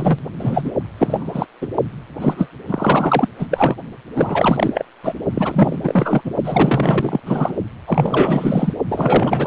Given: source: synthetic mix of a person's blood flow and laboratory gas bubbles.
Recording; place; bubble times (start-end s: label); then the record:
Doppler ultrasound of blood flow; precordium
0.00-0.19 s: bubbles
0.40-0.72 s: bubbles
0.98-1.46 s: bubbles
1.61-1.68 s: bubbles
2.20-2.49 s: bubbles
2.68-3.28 s: bubbles
3.38-3.47 s: bubbles
3.50-3.75 s: bubbles
4.16-4.85 s: bubbles
5.03-5.14 s: bubbles
5.34-5.79 s: bubbles
5.83-6.32 s: bubbles
6.43-7.20 s: bubbles
7.25-7.55 s: bubbles
7.87-8.73 s: bubbles
8.88-9.47 s: bubbles
From the record:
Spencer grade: 4 (maximum detectable bubble signal sounding continuously throughout systole and diastole of every cardiac period, and overriding the amplitude of the normal cardiac signals); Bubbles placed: only in the low amplitude regions of the cardiac cycle